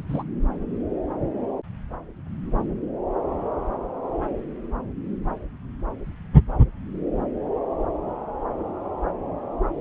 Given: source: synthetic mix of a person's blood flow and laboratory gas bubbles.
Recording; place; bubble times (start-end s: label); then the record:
Doppler ultrasound of blood flow; subclavian vein
0.00-0.04 s: bubbles
0.08-0.24 s: bubbles
From the record:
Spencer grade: 1 (occasional bubble signal discernible with the cardiac motion signal, with majority of cardiac periods free of bubbles); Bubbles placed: anywhere in the cardiac cycle